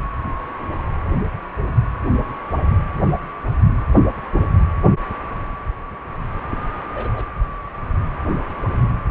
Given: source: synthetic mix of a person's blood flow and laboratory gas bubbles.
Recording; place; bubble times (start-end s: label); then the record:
Doppler ultrasound of blood flow; precordium
6.50-6.58 s: bubbles
6.94-7.24 s: bubbles
From the record:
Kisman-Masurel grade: 111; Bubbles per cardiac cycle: 1 to 2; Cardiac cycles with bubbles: 1 to 10%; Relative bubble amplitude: barely perceptible (0.100 to 0.250); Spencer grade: 1 (occasional bubble signal discernible with the cardiac motion signal, with majority of cardiac periods free of bubbles); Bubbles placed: anywhere in the cardiac cycle